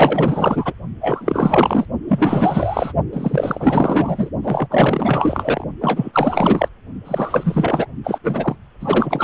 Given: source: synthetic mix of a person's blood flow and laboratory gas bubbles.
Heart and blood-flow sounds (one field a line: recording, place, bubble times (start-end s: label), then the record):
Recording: Doppler ultrasound of blood flow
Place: precordium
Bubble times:
0.00-0.73 s: bubbles
1.01-1.85 s: bubbles
2.08-2.93 s: bubbles
3.13-4.30 s: bubbles
4.43-4.67 s: bubbles
4.69-5.64 s: bubbles
5.80-6.68 s: bubbles
7.04-7.87 s: bubbles
8.04-8.19 s: bubbles
8.23-8.55 s: bubbles
8.80-9.24 s: bubbles
From the record:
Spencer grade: 4 (maximum detectable bubble signal sounding continuously throughout systole and diastole of every cardiac period, and overriding the amplitude of the normal cardiac signals)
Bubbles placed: only in the low amplitude regions of the cardiac cycle